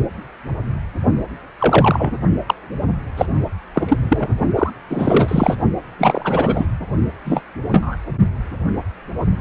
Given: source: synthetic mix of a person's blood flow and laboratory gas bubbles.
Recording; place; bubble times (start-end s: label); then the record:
Doppler ultrasound of blood flow; precordium
1.59-2.17 s: bubbles
2.46-2.54 s: bubbles
3.17-3.25 s: bubbles
3.75-3.98 s: bubbles
4.01-4.30 s: bubbles
4.55-4.70 s: bubbles
4.89-5.55 s: bubbles
5.99-6.66 s: bubbles
7.25-7.42 s: bubbles
7.72-7.96 s: bubbles
From the record:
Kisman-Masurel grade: 233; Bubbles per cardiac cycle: several, 3 to 8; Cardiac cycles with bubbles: 50 to 99%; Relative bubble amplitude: loud (0.450 to 0.775); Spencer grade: 3 (all of the cardiac periods contain showers or single bubble signals, but not dominating or overriding the cardiac motion signals); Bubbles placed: only in the low amplitude regions of the cardiac cycle